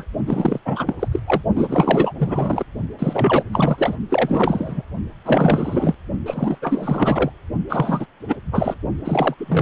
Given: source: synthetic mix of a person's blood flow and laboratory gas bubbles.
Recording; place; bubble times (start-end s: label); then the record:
Doppler ultrasound of blood flow; precordium
0.00-0.05 s: bubbles
0.26-0.59 s: bubbles
0.65-0.93 s: bubbles
0.99-1.08 s: bubbles
1.11-1.19 s: bubbles
1.27-1.42 s: bubbles
1.54-2.14 s: bubbles
2.18-2.65 s: bubbles
2.99-3.43 s: bubbles
3.52-3.97 s: bubbles
4.09-4.82 s: bubbles
5.25-5.96 s: bubbles
6.25-6.58 s: bubbles
6.61-7.31 s: bubbles
7.69-8.06 s: bubbles
8.28-8.37 s: bubbles
8.52-8.74 s: bubbles
9.04-9.34 s: bubbles
9.38-9.62 s: bubbles
From the record:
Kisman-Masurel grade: 444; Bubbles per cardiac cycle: continuous sound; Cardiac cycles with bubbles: 100%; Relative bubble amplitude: maximal (0.775 to 0.999); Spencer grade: 4 (maximum detectable bubble signal sounding continuously throughout systole and diastole of every cardiac period, and overriding the amplitude of the normal cardiac signals); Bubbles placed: only in the low amplitude regions of the cardiac cycle